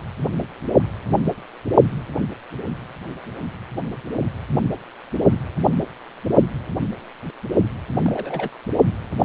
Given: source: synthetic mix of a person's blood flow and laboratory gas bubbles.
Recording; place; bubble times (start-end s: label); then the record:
Doppler ultrasound of blood flow; precordium
7.96-8.49 s: bubbles
9.21-9.25 s: bubbles
From the record:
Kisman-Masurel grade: 121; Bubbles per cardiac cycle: 1 to 2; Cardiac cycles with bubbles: 10 to 50%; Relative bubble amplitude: barely perceptible (0.100 to 0.250); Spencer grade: 2 (many but less than half of the cardiac periods contain bubble signals, singularly or in groups); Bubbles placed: only in the low amplitude regions of the cardiac cycle